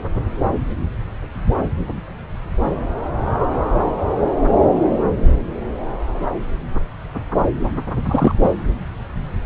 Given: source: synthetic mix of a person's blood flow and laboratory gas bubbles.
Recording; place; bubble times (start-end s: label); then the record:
Doppler ultrasound of blood flow; subclavian vein
7.93-8.35 s: bubbles
8.43-8.49 s: bubbles
From the record:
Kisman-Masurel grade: 213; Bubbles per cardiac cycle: several, 3 to 8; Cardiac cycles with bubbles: 1 to 10%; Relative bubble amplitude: loud (0.450 to 0.775); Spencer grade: 1 (occasional bubble signal discernible with the cardiac motion signal, with majority of cardiac periods free of bubbles); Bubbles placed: anywhere in the cardiac cycle